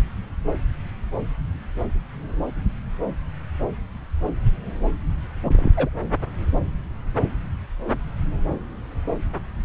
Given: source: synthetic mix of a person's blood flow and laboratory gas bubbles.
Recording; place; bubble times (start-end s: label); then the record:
Doppler ultrasound of blood flow; subclavian vein
5.44-5.70 s: bubbles
5.77-5.89 s: bubbles
From the record:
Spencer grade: 1 (occasional bubble signal discernible with the cardiac motion signal, with majority of cardiac periods free of bubbles); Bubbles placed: anywhere in the cardiac cycle